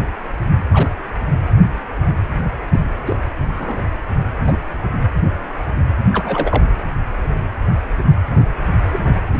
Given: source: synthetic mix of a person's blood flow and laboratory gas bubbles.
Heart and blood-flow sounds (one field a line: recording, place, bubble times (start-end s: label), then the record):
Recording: Doppler ultrasound of blood flow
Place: precordium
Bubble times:
0.71-0.90 s: bubbles
2.72-2.80 s: bubbles
3.05-3.16 s: bubbles
3.59-3.83 s: bubbles
4.45-4.57 s: bubbles
6.12-6.64 s: bubbles
8.92-9.01 s: bubbles
9.33-9.38 s: bubbles
From the record:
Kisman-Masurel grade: 122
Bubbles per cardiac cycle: 1 to 2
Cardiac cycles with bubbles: 10 to 50%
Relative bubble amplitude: moderate (0.250 to 0.450)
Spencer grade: 2 (many but less than half of the cardiac periods contain bubble signals, singularly or in groups)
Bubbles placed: anywhere in the cardiac cycle